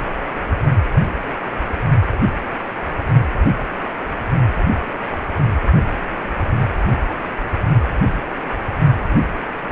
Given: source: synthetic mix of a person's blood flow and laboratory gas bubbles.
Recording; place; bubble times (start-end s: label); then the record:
Doppler ultrasound of blood flow; precordium
2.06-2.34 s: bubbles
2.56-2.68 s: bubbles
From the record:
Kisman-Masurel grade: 111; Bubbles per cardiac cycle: 1 to 2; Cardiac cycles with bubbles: 1 to 10%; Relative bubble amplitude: barely perceptible (0.100 to 0.250); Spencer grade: 1 (occasional bubble signal discernible with the cardiac motion signal, with majority of cardiac periods free of bubbles); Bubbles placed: only in the low amplitude regions of the cardiac cycle